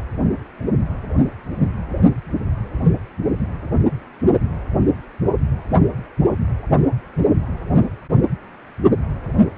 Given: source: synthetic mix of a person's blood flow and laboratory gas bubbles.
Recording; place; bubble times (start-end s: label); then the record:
Doppler ultrasound of blood flow; precordium
no bubbles
From the record:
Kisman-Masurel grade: 000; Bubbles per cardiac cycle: 0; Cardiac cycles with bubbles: 0%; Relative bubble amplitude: no bubbles discernible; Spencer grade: 0 (complete lack of bubble signals)